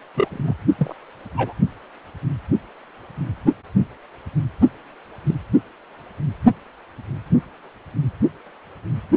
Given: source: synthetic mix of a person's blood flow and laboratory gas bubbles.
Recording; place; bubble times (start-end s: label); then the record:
Doppler ultrasound of blood flow; precordium
0.15-0.54 s: bubbles
0.79-0.95 s: bubbles
1.36-1.53 s: bubbles
5.26-5.35 s: bubbles
From the record:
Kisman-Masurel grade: 122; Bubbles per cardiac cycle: 1 to 2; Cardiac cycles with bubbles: 10 to 50%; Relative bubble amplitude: moderate (0.250 to 0.450); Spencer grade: 2 (many but less than half of the cardiac periods contain bubble signals, singularly or in groups); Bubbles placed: only in the low amplitude regions of the cardiac cycle